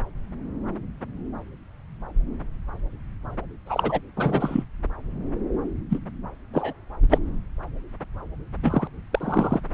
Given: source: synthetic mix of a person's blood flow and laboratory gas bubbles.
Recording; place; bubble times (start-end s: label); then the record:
Doppler ultrasound of blood flow; subclavian vein
3.66-4.00 s: bubbles
4.16-4.64 s: bubbles
5.90-5.99 s: bubbles
6.54-6.72 s: bubbles
7.09-7.18 s: bubbles
8.63-8.88 s: bubbles
9.12-9.61 s: bubbles
From the record:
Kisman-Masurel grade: 222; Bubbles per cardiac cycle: several, 3 to 8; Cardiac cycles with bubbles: 10 to 50%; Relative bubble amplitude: moderate (0.250 to 0.450); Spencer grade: 2 (many but less than half of the cardiac periods contain bubble signals, singularly or in groups); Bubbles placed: anywhere in the cardiac cycle